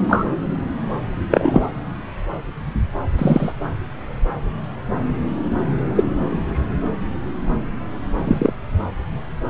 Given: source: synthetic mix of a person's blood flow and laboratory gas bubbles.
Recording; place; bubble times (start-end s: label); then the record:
Doppler ultrasound of blood flow; subclavian vein
0.09-0.25 s: bubbles
1.31-1.67 s: bubbles
3.18-3.52 s: bubbles
5.95-6.04 s: bubbles
8.24-8.54 s: bubbles
From the record:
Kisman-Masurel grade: 123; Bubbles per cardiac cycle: 1 to 2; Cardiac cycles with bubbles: 10 to 50%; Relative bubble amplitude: loud (0.450 to 0.775); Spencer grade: 2 (many but less than half of the cardiac periods contain bubble signals, singularly or in groups); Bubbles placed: anywhere in the cardiac cycle